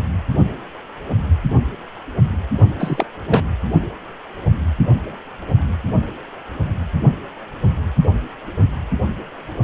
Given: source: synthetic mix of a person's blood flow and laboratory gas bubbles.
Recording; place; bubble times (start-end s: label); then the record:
Doppler ultrasound of blood flow; precordium
2.79-3.06 s: bubbles
3.29-3.43 s: bubbles
From the record:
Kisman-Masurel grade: 223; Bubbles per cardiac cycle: several, 3 to 8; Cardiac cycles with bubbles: 10 to 50%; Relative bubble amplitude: loud (0.450 to 0.775); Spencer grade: 2 (many but less than half of the cardiac periods contain bubble signals, singularly or in groups); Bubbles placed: only in the low amplitude regions of the cardiac cycle